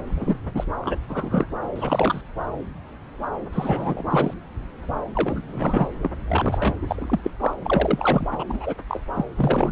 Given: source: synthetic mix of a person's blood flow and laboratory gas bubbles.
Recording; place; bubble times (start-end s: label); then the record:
Doppler ultrasound of blood flow; subclavian vein
0.07-0.39 s: bubbles
0.55-0.65 s: bubbles
0.81-0.97 s: bubbles
1.08-1.46 s: bubbles
1.75-2.22 s: bubbles
3.53-4.04 s: bubbles
4.10-4.34 s: bubbles
5.13-5.88 s: bubbles
6.02-6.10 s: bubbles
6.28-6.75 s: bubbles
6.82-7.21 s: bubbles
7.24-7.31 s: bubbles
7.40-7.54 s: bubbles
7.63-8.27 s: bubbles
8.39-8.44 s: bubbles
8.48-8.74 s: bubbles
8.89-9.00 s: bubbles
9.15-9.25 s: bubbles
9.37-9.72 s: bubbles
From the record:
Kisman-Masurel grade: 232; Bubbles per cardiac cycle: several, 3 to 8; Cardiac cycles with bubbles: 50 to 99%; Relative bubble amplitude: moderate (0.250 to 0.450); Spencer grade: 3 (all of the cardiac periods contain showers or single bubble signals, but not dominating or overriding the cardiac motion signals); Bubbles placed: anywhere in the cardiac cycle